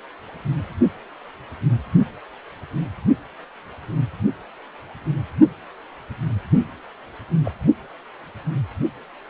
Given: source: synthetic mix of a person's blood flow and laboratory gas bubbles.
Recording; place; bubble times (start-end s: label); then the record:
Doppler ultrasound of blood flow; precordium
6.53-6.58 s: bubbles
7.45-7.52 s: bubbles
From the record:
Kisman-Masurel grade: 121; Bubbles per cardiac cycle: 1 to 2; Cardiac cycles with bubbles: 10 to 50%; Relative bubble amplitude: barely perceptible (0.100 to 0.250); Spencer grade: 2 (many but less than half of the cardiac periods contain bubble signals, singularly or in groups); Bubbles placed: only in the low amplitude regions of the cardiac cycle